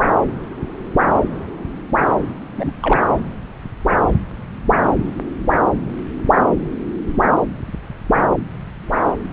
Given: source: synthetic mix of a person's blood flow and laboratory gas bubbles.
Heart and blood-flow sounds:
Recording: Doppler ultrasound of blood flow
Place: subclavian vein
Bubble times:
2.56-2.72 s: bubbles
2.81-3.03 s: bubbles
From the record:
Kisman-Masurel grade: 112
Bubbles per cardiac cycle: 1 to 2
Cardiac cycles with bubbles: 1 to 10%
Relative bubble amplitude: moderate (0.250 to 0.450)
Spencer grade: 1 (occasional bubble signal discernible with the cardiac motion signal, with majority of cardiac periods free of bubbles)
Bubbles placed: anywhere in the cardiac cycle

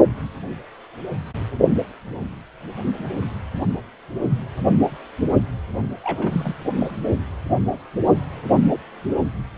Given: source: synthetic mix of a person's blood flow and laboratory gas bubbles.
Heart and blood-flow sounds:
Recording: Doppler ultrasound of blood flow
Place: precordium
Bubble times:
6.04-6.56 s: bubbles
6.79-6.91 s: bubbles
From the record:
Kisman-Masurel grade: 211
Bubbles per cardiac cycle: several, 3 to 8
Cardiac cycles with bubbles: 1 to 10%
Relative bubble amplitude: barely perceptible (0.100 to 0.250)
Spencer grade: 1 (occasional bubble signal discernible with the cardiac motion signal, with majority of cardiac periods free of bubbles)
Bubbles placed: only in the low amplitude regions of the cardiac cycle

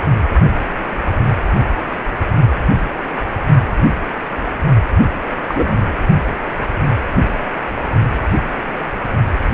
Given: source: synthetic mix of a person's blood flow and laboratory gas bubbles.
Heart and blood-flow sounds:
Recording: Doppler ultrasound of blood flow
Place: precordium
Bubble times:
5.48-5.79 s: bubbles
From the record:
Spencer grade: 1 (occasional bubble signal discernible with the cardiac motion signal, with majority of cardiac periods free of bubbles)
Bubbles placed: only in the low amplitude regions of the cardiac cycle

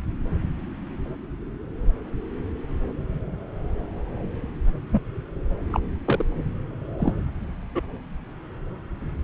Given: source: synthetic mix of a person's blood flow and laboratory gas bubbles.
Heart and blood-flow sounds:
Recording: Doppler ultrasound of blood flow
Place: subclavian vein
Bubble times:
4.92-5.01 s: bubbles
5.72-5.80 s: bubbles
6.05-6.24 s: bubbles
7.00-7.13 s: bubbles
7.75-7.82 s: bubbles
From the record:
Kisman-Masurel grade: 122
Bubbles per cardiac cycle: 1 to 2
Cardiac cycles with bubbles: 10 to 50%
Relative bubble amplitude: moderate (0.250 to 0.450)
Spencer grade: 2 (many but less than half of the cardiac periods contain bubble signals, singularly or in groups)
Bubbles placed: anywhere in the cardiac cycle

